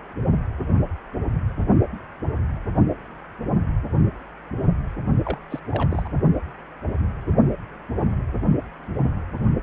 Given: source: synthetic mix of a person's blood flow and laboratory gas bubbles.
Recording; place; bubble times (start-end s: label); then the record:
Doppler ultrasound of blood flow; precordium
5.25-5.38 s: bubbles
5.50-5.59 s: bubbles
5.70-6.08 s: bubbles
From the record:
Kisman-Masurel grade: 211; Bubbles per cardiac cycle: several, 3 to 8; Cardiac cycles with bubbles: 1 to 10%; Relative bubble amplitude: barely perceptible (0.100 to 0.250); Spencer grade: 1 (occasional bubble signal discernible with the cardiac motion signal, with majority of cardiac periods free of bubbles); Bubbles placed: only in the low amplitude regions of the cardiac cycle